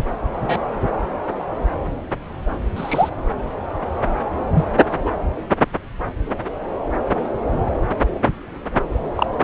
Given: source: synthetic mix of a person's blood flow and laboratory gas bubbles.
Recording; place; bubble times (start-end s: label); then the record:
Doppler ultrasound of blood flow; subclavian vein
0.41-0.57 s: bubbles
2.76-3.09 s: bubbles
4.54-4.66 s: bubbles
5.04-5.11 s: bubbles
9.15-9.27 s: bubbles
From the record:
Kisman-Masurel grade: 123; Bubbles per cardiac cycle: 1 to 2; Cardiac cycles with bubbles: 10 to 50%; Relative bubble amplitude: loud (0.450 to 0.775); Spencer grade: 2 (many but less than half of the cardiac periods contain bubble signals, singularly or in groups); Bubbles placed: anywhere in the cardiac cycle